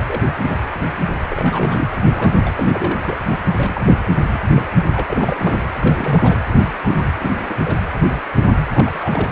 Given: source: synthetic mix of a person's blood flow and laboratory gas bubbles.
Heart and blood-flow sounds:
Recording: Doppler ultrasound of blood flow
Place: precordium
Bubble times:
0.06-0.22 s: bubbles
0.37-0.58 s: bubbles
1.29-1.88 s: bubbles
2.13-2.30 s: bubbles
2.35-2.99 s: bubbles
3.04-3.17 s: bubbles
3.29-3.41 s: bubbles
3.54-3.96 s: bubbles
4.33-4.39 s: bubbles
4.53-4.65 s: bubbles
4.94-5.04 s: bubbles
5.08-5.59 s: bubbles
5.79-6.38 s: bubbles
6.83-7.08 s: bubbles
7.20-7.32 s: bubbles
7.37-7.60 s: bubbles
7.66-7.76 s: bubbles
8.07-8.22 s: bubbles
8.38-8.46 s: bubbles
8.71-9.32 s: bubbles
From the record:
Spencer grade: 3 (all of the cardiac periods contain showers or single bubble signals, but not dominating or overriding the cardiac motion signals)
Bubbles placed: anywhere in the cardiac cycle

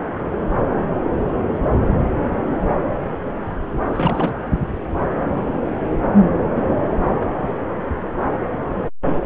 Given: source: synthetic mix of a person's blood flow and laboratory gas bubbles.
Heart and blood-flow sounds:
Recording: Doppler ultrasound of blood flow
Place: subclavian vein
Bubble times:
3.95-4.33 s: bubbles
From the record:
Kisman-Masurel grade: 212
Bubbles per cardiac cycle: several, 3 to 8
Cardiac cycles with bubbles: 1 to 10%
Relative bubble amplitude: moderate (0.250 to 0.450)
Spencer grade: 1 (occasional bubble signal discernible with the cardiac motion signal, with majority of cardiac periods free of bubbles)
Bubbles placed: anywhere in the cardiac cycle

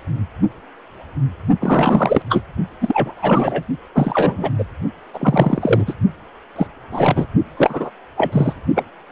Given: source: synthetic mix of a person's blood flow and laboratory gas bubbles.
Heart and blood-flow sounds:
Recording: Doppler ultrasound of blood flow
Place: precordium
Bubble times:
1.61-2.22 s: bubbles
2.29-2.42 s: bubbles
2.80-3.64 s: bubbles
3.95-4.50 s: bubbles
4.58-4.65 s: bubbles
5.14-5.94 s: bubbles
6.56-6.67 s: bubbles
6.92-7.26 s: bubbles
7.57-7.90 s: bubbles
8.16-8.54 s: bubbles
8.74-8.85 s: bubbles
From the record:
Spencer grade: 3 (all of the cardiac periods contain showers or single bubble signals, but not dominating or overriding the cardiac motion signals)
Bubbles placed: only in the low amplitude regions of the cardiac cycle

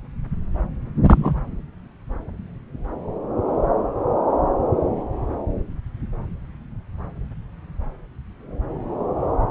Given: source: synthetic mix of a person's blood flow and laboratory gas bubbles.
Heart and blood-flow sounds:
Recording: Doppler ultrasound of blood flow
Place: subclavian vein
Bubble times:
1.07-1.42 s: bubbles
From the record:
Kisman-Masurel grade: 122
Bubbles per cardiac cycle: 1 to 2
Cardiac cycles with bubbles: 10 to 50%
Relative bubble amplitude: moderate (0.250 to 0.450)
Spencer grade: 2 (many but less than half of the cardiac periods contain bubble signals, singularly or in groups)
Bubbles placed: anywhere in the cardiac cycle

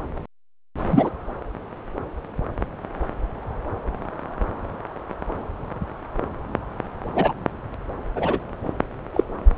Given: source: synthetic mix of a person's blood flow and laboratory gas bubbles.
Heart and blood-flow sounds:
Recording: Doppler ultrasound of blood flow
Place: subclavian vein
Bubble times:
0.84-1.09 s: bubbles
7.15-7.33 s: bubbles
8.15-8.41 s: bubbles
9.13-9.24 s: bubbles
From the record:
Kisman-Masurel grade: 123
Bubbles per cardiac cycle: 1 to 2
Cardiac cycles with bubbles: 10 to 50%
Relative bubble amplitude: loud (0.450 to 0.775)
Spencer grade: 2 (many but less than half of the cardiac periods contain bubble signals, singularly or in groups)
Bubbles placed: anywhere in the cardiac cycle

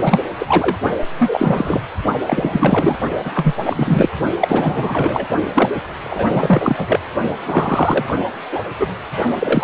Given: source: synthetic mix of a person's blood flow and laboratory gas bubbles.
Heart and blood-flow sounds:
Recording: Doppler ultrasound of blood flow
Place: precordium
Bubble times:
0.02-0.19 s: bubbles
0.39-0.77 s: bubbles
1.18-1.81 s: bubbles
2.26-2.96 s: bubbles
3.24-3.54 s: bubbles
3.65-4.09 s: bubbles
4.40-5.27 s: bubbles
5.54-5.69 s: bubbles
6.03-6.29 s: bubbles
6.33-7.00 s: bubbles
7.46-8.17 s: bubbles
8.51-8.62 s: bubbles
8.79-8.88 s: bubbles
9.40-9.64 s: bubbles
From the record:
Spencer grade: 3 (all of the cardiac periods contain showers or single bubble signals, but not dominating or overriding the cardiac motion signals)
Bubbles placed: only in the low amplitude regions of the cardiac cycle

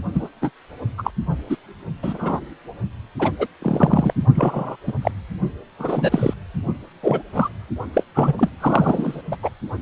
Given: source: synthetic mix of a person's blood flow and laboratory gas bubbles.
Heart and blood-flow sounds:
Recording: Doppler ultrasound of blood flow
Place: precordium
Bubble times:
0.14-0.29 s: bubbles
0.42-0.51 s: bubbles
0.97-1.11 s: bubbles
1.49-1.56 s: bubbles
2.03-2.41 s: bubbles
3.19-3.32 s: bubbles
3.39-3.47 s: bubbles
3.62-4.13 s: bubbles
4.34-4.77 s: bubbles
4.87-4.93 s: bubbles
5.02-5.11 s: bubbles
5.79-6.33 s: bubbles
7.03-7.23 s: bubbles
7.33-7.49 s: bubbles
7.93-8.04 s: bubbles
8.14-8.33 s: bubbles
8.38-8.49 s: bubbles
8.60-9.21 s: bubbles
9.31-9.36 s: bubbles
9.42-9.50 s: bubbles
From the record:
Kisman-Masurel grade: 233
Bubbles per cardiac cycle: several, 3 to 8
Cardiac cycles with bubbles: 50 to 99%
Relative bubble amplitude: loud (0.450 to 0.775)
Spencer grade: 3 (all of the cardiac periods contain showers or single bubble signals, but not dominating or overriding the cardiac motion signals)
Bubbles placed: only in the low amplitude regions of the cardiac cycle

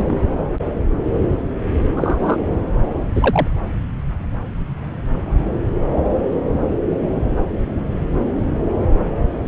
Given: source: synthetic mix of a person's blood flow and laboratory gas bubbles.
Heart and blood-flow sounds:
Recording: Doppler ultrasound of blood flow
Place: subclavian vein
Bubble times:
0.00-0.27 s: bubbles
1.96-2.37 s: bubbles
3.15-3.48 s: bubbles
From the record:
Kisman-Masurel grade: 123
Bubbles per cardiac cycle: 1 to 2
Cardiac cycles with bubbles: 10 to 50%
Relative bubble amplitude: loud (0.450 to 0.775)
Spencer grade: 2 (many but less than half of the cardiac periods contain bubble signals, singularly or in groups)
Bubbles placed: anywhere in the cardiac cycle

